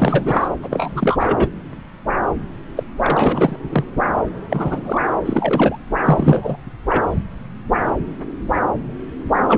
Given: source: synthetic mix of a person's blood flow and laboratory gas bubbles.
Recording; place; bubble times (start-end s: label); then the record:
Doppler ultrasound of blood flow; subclavian vein
0.00-0.48 s: bubbles
0.61-1.50 s: bubbles
2.76-2.83 s: bubbles
3.03-3.56 s: bubbles
3.69-3.85 s: bubbles
4.49-5.02 s: bubbles
5.25-5.78 s: bubbles
6.05-6.57 s: bubbles
6.88-7.04 s: bubbles
9.47-9.58 s: bubbles
From the record:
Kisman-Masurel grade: 333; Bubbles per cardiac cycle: rolling drumbeat, 9 or more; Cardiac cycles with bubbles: 50 to 99%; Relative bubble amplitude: loud (0.450 to 0.775); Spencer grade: 3 (all of the cardiac periods contain showers or single bubble signals, but not dominating or overriding the cardiac motion signals); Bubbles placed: anywhere in the cardiac cycle